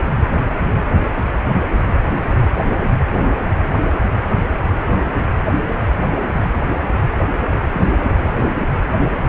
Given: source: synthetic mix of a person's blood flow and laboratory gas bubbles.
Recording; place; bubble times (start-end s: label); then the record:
Doppler ultrasound of blood flow; precordium
7.51-7.62 s: bubbles
7.72-7.87 s: bubbles
8.37-8.53 s: bubbles
From the record:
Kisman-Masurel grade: 212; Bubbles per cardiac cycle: several, 3 to 8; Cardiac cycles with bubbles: 1 to 10%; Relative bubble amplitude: moderate (0.250 to 0.450); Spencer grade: 1 (occasional bubble signal discernible with the cardiac motion signal, with majority of cardiac periods free of bubbles); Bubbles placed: anywhere in the cardiac cycle